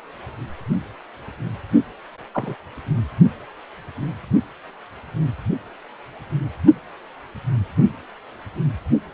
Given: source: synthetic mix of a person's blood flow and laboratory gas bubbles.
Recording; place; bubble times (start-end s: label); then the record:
Doppler ultrasound of blood flow; precordium
2.33-2.55 s: bubbles
From the record:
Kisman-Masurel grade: 112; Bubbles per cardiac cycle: 1 to 2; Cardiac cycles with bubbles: 1 to 10%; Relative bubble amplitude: moderate (0.250 to 0.450); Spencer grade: 1 (occasional bubble signal discernible with the cardiac motion signal, with majority of cardiac periods free of bubbles); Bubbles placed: only in the low amplitude regions of the cardiac cycle